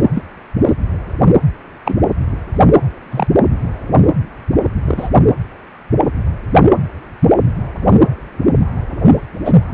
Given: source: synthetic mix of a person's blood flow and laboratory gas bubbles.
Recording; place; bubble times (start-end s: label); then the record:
Doppler ultrasound of blood flow; precordium
0.14-0.22 s: bubbles
0.65-0.73 s: bubbles
1.85-1.97 s: bubbles
3.10-3.28 s: bubbles
4.86-5.09 s: bubbles
9.44-9.54 s: bubbles
From the record:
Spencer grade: 2 (many but less than half of the cardiac periods contain bubble signals, singularly or in groups); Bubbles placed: anywhere in the cardiac cycle